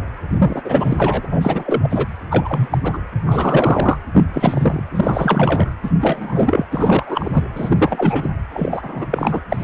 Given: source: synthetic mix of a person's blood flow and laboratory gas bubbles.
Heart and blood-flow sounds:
Doppler ultrasound of blood flow; precordium
0.30-0.61 s: bubbles
0.65-1.27 s: bubbles
1.31-2.06 s: bubbles
2.29-2.78 s: bubbles
2.83-2.98 s: bubbles
3.25-3.97 s: bubbles
4.13-4.25 s: bubbles
4.33-4.86 s: bubbles
4.90-5.71 s: bubbles
5.83-5.90 s: bubbles
6.01-6.66 s: bubbles
6.72-7.44 s: bubbles
7.55-8.30 s: bubbles
8.53-9.06 s: bubbles
9.10-9.41 s: bubbles
9.51-9.64 s: bubbles
From the record:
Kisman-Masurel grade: 343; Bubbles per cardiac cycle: rolling drumbeat, 9 or more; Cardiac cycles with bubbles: 100%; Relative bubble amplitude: loud (0.450 to 0.775); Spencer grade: 3 (all of the cardiac periods contain showers or single bubble signals, but not dominating or overriding the cardiac motion signals); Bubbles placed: anywhere in the cardiac cycle

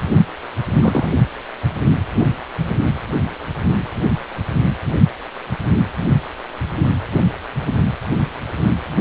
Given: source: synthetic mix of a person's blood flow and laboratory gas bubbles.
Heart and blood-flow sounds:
Doppler ultrasound of blood flow; precordium
0.76-1.19 s: bubbles
From the record:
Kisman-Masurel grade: 112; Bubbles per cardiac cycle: 1 to 2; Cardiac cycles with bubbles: 1 to 10%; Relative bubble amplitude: moderate (0.250 to 0.450); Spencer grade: 1 (occasional bubble signal discernible with the cardiac motion signal, with majority of cardiac periods free of bubbles); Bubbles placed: only in the low amplitude regions of the cardiac cycle

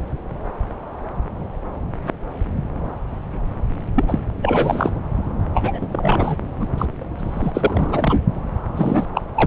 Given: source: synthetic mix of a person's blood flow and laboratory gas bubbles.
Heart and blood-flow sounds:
Doppler ultrasound of blood flow; subclavian vein
3.95-4.04 s: bubbles
4.08-4.20 s: bubbles
4.42-4.92 s: bubbles
5.54-5.87 s: bubbles
5.92-6.38 s: bubbles
6.60-6.67 s: bubbles
6.78-6.85 s: bubbles
7.18-8.20 s: bubbles
8.77-9.05 s: bubbles
9.14-9.22 s: bubbles
9.35-9.46 s: bubbles
From the record:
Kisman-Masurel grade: 333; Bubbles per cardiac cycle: rolling drumbeat, 9 or more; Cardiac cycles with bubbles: 50 to 99%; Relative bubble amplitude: loud (0.450 to 0.775); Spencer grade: 3 (all of the cardiac periods contain showers or single bubble signals, but not dominating or overriding the cardiac motion signals); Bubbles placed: anywhere in the cardiac cycle

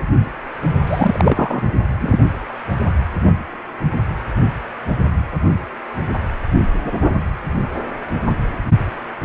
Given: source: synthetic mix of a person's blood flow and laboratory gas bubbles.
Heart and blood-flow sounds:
Doppler ultrasound of blood flow; precordium
0.86-1.73 s: bubbles
2.00-2.19 s: bubbles
From the record:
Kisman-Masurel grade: 213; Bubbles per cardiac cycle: several, 3 to 8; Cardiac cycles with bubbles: 1 to 10%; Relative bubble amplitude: loud (0.450 to 0.775); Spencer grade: 1 (occasional bubble signal discernible with the cardiac motion signal, with majority of cardiac periods free of bubbles); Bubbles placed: only in the low amplitude regions of the cardiac cycle

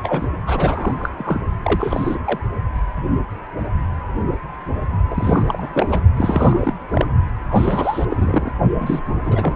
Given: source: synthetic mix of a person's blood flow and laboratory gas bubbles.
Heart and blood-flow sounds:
Doppler ultrasound of blood flow; precordium
0.03-0.28 s: bubbles
0.46-1.10 s: bubbles
1.17-1.41 s: bubbles
1.62-2.18 s: bubbles
2.25-2.39 s: bubbles
5.10-5.69 s: bubbles
5.73-6.01 s: bubbles
6.17-6.74 s: bubbles
6.89-7.06 s: bubbles
7.50-8.05 s: bubbles
8.09-8.53 s: bubbles
8.80-9.02 s: bubbles
9.23-9.56 s: bubbles
From the record:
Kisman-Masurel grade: 332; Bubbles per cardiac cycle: rolling drumbeat, 9 or more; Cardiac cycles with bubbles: 50 to 99%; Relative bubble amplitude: moderate (0.250 to 0.450); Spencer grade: 3 (all of the cardiac periods contain showers or single bubble signals, but not dominating or overriding the cardiac motion signals); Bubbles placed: only in the low amplitude regions of the cardiac cycle

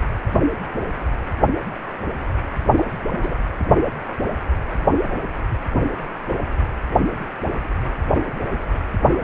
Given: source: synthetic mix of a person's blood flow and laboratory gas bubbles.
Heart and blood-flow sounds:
Doppler ultrasound of blood flow; precordium
2.77-2.84 s: bubbles
3.13-3.19 s: bubbles
3.22-3.34 s: bubbles
From the record:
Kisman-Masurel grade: 212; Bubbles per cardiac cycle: several, 3 to 8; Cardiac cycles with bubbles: 1 to 10%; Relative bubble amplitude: moderate (0.250 to 0.450); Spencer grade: 1 (occasional bubble signal discernible with the cardiac motion signal, with majority of cardiac periods free of bubbles); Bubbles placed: anywhere in the cardiac cycle

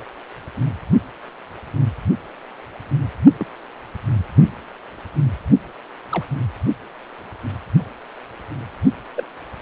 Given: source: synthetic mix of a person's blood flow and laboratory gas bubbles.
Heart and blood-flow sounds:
Doppler ultrasound of blood flow; precordium
3.39-3.47 s: bubbles
6.11-6.24 s: bubbles
9.14-9.23 s: bubbles
From the record:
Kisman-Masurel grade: 121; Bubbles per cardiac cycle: 1 to 2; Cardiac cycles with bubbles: 10 to 50%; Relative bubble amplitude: barely perceptible (0.100 to 0.250); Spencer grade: 2 (many but less than half of the cardiac periods contain bubble signals, singularly or in groups); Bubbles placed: only in the low amplitude regions of the cardiac cycle

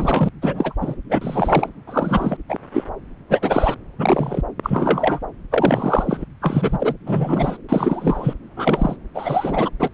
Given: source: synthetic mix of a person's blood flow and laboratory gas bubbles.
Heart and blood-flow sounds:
Doppler ultrasound of blood flow; subclavian vein
0.00-0.29 s: bubbles
0.41-0.74 s: bubbles
0.81-0.95 s: bubbles
1.09-1.70 s: bubbles
1.87-2.37 s: bubbles
2.48-2.58 s: bubbles
2.73-2.84 s: bubbles
3.29-3.75 s: bubbles
3.98-4.42 s: bubbles
4.62-5.20 s: bubbles
5.51-6.25 s: bubbles
6.41-6.95 s: bubbles
7.06-7.57 s: bubbles
7.69-8.34 s: bubbles
8.57-8.96 s: bubbles
9.14-9.70 s: bubbles
9.79-9.89 s: bubbles
From the record:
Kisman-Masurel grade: 243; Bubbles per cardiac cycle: several, 3 to 8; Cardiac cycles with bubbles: 100%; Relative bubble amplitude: loud (0.450 to 0.775); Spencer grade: 3 (all of the cardiac periods contain showers or single bubble signals, but not dominating or overriding the cardiac motion signals); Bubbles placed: anywhere in the cardiac cycle

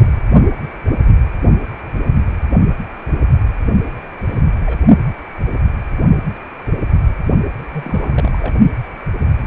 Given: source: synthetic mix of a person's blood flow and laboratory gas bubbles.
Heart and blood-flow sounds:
Doppler ultrasound of blood flow; precordium
3.86-3.91 s: bubbles
4.23-4.42 s: bubbles
4.66-4.78 s: bubbles
7.58-7.67 s: bubbles
7.72-8.56 s: bubbles
From the record:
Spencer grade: 2 (many but less than half of the cardiac periods contain bubble signals, singularly or in groups); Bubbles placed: only in the low amplitude regions of the cardiac cycle

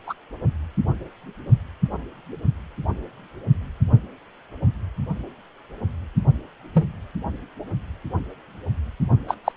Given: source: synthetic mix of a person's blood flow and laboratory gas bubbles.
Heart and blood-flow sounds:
Doppler ultrasound of blood flow; precordium
0.07-0.14 s: bubbles
6.74-6.85 s: bubbles
9.28-9.36 s: bubbles
9.44-9.52 s: bubbles
From the record:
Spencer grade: 2 (many but less than half of the cardiac periods contain bubble signals, singularly or in groups); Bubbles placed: only in the low amplitude regions of the cardiac cycle

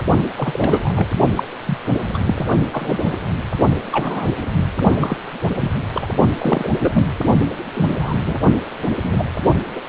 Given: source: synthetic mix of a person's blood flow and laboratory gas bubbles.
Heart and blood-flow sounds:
Doppler ultrasound of blood flow; precordium
0.22-0.29 s: bubbles
0.36-1.07 s: bubbles
1.35-1.44 s: bubbles
1.67-1.78 s: bubbles
2.13-2.19 s: bubbles
2.26-2.46 s: bubbles
2.73-3.18 s: bubbles
3.92-4.28 s: bubbles
5.00-5.18 s: bubbles
5.60-5.72 s: bubbles
5.95-6.08 s: bubbles
6.38-6.69 s: bubbles
6.81-7.04 s: bubbles
7.74-8.19 s: bubbles
8.26-8.38 s: bubbles
9.04-9.23 s: bubbles
9.75-9.81 s: bubbles
From the record:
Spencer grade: 3 (all of the cardiac periods contain showers or single bubble signals, but not dominating or overriding the cardiac motion signals); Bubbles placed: only in the low amplitude regions of the cardiac cycle

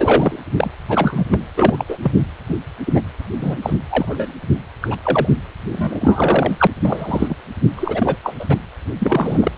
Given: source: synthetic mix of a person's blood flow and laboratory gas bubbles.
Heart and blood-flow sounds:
Doppler ultrasound of blood flow; precordium
0.00-0.39 s: bubbles
0.56-0.71 s: bubbles
0.88-1.25 s: bubbles
1.29-1.39 s: bubbles
1.56-1.84 s: bubbles
1.88-1.98 s: bubbles
2.01-2.26 s: bubbles
2.48-2.55 s: bubbles
2.86-3.01 s: bubbles
3.40-3.58 s: bubbles
3.62-3.73 s: bubbles
3.89-4.31 s: bubbles
4.81-4.97 s: bubbles
5.04-5.29 s: bubbles
5.71-6.67 s: bubbles
6.82-7.35 s: bubbles
7.75-8.17 s: bubbles
8.23-8.34 s: bubbles
8.39-8.46 s: bubbles
8.49-8.56 s: bubbles
8.98-9.52 s: bubbles
From the record:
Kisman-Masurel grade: 243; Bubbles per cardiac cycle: several, 3 to 8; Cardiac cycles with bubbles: 100%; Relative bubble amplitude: loud (0.450 to 0.775); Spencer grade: 3 (all of the cardiac periods contain showers or single bubble signals, but not dominating or overriding the cardiac motion signals); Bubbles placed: anywhere in the cardiac cycle

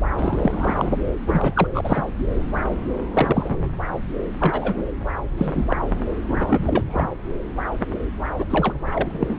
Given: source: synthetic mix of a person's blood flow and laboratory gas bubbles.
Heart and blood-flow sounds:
Doppler ultrasound of blood flow; subclavian vein
0.17-0.90 s: bubbles
1.27-1.68 s: bubbles
1.74-1.81 s: bubbles
1.84-2.02 s: bubbles
3.14-3.56 s: bubbles
4.40-4.82 s: bubbles
5.38-5.64 s: bubbles
5.69-5.76 s: bubbles
6.28-7.08 s: bubbles
8.38-8.45 s: bubbles
8.50-8.74 s: bubbles
8.90-9.37 s: bubbles
From the record:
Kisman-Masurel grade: 232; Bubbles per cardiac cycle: several, 3 to 8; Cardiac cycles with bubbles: 50 to 99%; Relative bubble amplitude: moderate (0.250 to 0.450); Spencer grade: 3 (all of the cardiac periods contain showers or single bubble signals, but not dominating or overriding the cardiac motion signals); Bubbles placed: anywhere in the cardiac cycle

